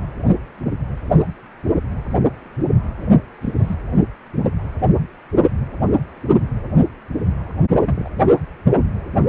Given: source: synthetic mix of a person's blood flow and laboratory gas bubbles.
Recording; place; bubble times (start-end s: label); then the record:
Doppler ultrasound of blood flow; precordium
3.42-3.76 s: bubbles
7.84-8.09 s: bubbles
From the record:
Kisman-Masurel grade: 121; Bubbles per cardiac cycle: 1 to 2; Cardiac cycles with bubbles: 10 to 50%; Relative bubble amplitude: barely perceptible (0.100 to 0.250); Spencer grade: 2 (many but less than half of the cardiac periods contain bubble signals, singularly or in groups); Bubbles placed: only in the low amplitude regions of the cardiac cycle